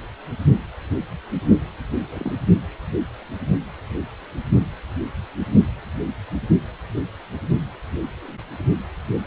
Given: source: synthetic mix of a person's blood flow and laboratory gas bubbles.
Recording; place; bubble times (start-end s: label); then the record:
Doppler ultrasound of blood flow; precordium
2.13-2.37 s: bubbles
From the record:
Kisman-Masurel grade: 121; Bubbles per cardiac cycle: 1 to 2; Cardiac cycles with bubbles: 10 to 50%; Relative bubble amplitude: barely perceptible (0.100 to 0.250); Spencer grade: 2 (many but less than half of the cardiac periods contain bubble signals, singularly or in groups); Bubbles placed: only in the low amplitude regions of the cardiac cycle